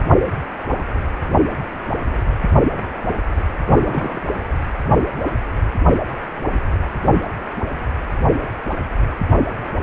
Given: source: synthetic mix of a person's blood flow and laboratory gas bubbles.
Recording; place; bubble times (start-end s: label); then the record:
Doppler ultrasound of blood flow; precordium
3.65-4.22 s: bubbles
From the record:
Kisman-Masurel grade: 111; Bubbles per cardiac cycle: 1 to 2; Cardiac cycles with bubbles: 1 to 10%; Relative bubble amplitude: barely perceptible (0.100 to 0.250); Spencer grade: 1 (occasional bubble signal discernible with the cardiac motion signal, with majority of cardiac periods free of bubbles); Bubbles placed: anywhere in the cardiac cycle